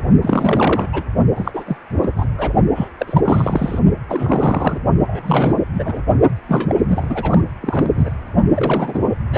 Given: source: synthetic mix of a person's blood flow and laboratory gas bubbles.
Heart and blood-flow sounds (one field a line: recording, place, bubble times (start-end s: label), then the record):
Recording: Doppler ultrasound of blood flow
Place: precordium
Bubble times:
0.21-0.88 s: bubbles
0.93-1.03 s: bubbles
1.35-1.77 s: bubbles
2.01-2.12 s: bubbles
2.16-2.26 s: bubbles
2.38-2.53 s: bubbles
2.75-2.88 s: bubbles
2.99-3.79 s: bubbles
4.08-4.79 s: bubbles
5.06-5.63 s: bubbles
5.73-6.02 s: bubbles
6.48-6.83 s: bubbles
6.88-7.41 s: bubbles
7.60-8.11 s: bubbles
8.54-8.99 s: bubbles
9.31-9.38 s: bubbles
From the record:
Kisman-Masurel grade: 342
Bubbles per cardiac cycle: rolling drumbeat, 9 or more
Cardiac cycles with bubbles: 100%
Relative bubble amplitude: moderate (0.250 to 0.450)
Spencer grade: 3 (all of the cardiac periods contain showers or single bubble signals, but not dominating or overriding the cardiac motion signals)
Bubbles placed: only in the low amplitude regions of the cardiac cycle